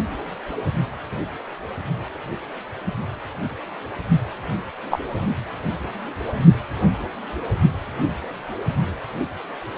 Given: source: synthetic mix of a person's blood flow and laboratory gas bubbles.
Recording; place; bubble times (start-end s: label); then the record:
Doppler ultrasound of blood flow; precordium
4.91-4.99 s: bubbles
From the record:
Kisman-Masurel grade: 123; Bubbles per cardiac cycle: 1 to 2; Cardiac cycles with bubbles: 10 to 50%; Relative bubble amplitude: loud (0.450 to 0.775); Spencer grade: 2 (many but less than half of the cardiac periods contain bubble signals, singularly or in groups); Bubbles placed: only in the low amplitude regions of the cardiac cycle